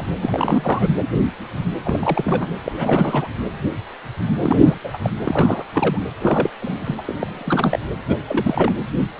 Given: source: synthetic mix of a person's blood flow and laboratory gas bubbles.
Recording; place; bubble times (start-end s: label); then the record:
Doppler ultrasound of blood flow; precordium
0.00-0.05 s: bubbles
0.21-0.88 s: bubbles
1.84-2.51 s: bubbles
2.64-2.72 s: bubbles
2.77-3.28 s: bubbles
4.42-4.79 s: bubbles
4.84-4.98 s: bubbles
5.02-5.10 s: bubbles
5.25-5.65 s: bubbles
5.73-5.98 s: bubbles
6.21-6.50 s: bubbles
6.62-7.02 s: bubbles
7.07-7.79 s: bubbles
8.07-8.17 s: bubbles
8.25-8.72 s: bubbles
From the record:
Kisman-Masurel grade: 332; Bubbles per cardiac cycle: rolling drumbeat, 9 or more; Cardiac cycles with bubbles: 50 to 99%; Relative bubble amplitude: moderate (0.250 to 0.450); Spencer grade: 3 (all of the cardiac periods contain showers or single bubble signals, but not dominating or overriding the cardiac motion signals); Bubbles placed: anywhere in the cardiac cycle